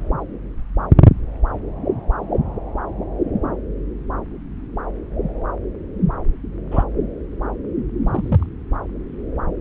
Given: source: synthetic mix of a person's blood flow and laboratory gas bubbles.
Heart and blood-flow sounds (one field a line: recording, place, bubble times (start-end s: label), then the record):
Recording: Doppler ultrasound of blood flow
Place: subclavian vein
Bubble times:
6.71-6.83 s: bubbles
8.07-8.46 s: bubbles
From the record:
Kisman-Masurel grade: 122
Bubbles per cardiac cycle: 1 to 2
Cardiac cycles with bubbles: 10 to 50%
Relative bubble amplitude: moderate (0.250 to 0.450)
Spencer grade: 2 (many but less than half of the cardiac periods contain bubble signals, singularly or in groups)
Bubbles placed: anywhere in the cardiac cycle